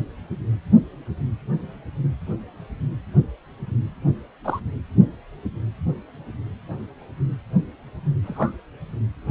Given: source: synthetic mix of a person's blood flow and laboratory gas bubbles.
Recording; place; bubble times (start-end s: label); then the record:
Doppler ultrasound of blood flow; precordium
4.45-4.59 s: bubbles
8.24-8.53 s: bubbles
From the record:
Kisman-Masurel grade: 122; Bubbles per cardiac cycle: 1 to 2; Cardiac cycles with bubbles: 10 to 50%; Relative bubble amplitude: moderate (0.250 to 0.450); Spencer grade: 2 (many but less than half of the cardiac periods contain bubble signals, singularly or in groups); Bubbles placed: anywhere in the cardiac cycle